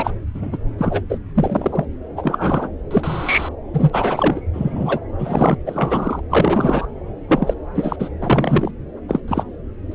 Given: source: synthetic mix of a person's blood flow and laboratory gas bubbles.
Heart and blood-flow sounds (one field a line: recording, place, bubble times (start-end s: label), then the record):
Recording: Doppler ultrasound of blood flow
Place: subclavian vein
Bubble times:
0.00-0.12 s: bubbles
0.34-0.58 s: bubbles
0.78-1.02 s: bubbles
1.09-1.18 s: bubbles
1.34-1.85 s: bubbles
2.17-2.69 s: bubbles
2.90-3.49 s: bubbles
3.73-4.41 s: bubbles
4.53-5.00 s: bubbles
5.18-5.57 s: bubbles
5.66-6.21 s: bubbles
6.30-6.86 s: bubbles
7.28-7.54 s: bubbles
7.75-7.96 s: bubbles
8.00-8.09 s: bubbles
8.21-8.71 s: bubbles
9.09-9.21 s: bubbles
9.28-9.44 s: bubbles
9.91-9.95 s: bubbles
From the record:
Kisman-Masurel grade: 243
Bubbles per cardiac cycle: several, 3 to 8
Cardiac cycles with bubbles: 100%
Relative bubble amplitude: loud (0.450 to 0.775)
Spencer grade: 3 (all of the cardiac periods contain showers or single bubble signals, but not dominating or overriding the cardiac motion signals)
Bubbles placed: anywhere in the cardiac cycle